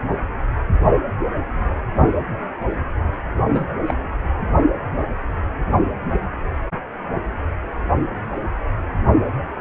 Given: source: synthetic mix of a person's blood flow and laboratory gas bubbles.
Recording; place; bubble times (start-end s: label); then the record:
Doppler ultrasound of blood flow; precordium
3.48-3.67 s: bubbles
3.86-3.94 s: bubbles
From the record:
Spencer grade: 1 (occasional bubble signal discernible with the cardiac motion signal, with majority of cardiac periods free of bubbles); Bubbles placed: anywhere in the cardiac cycle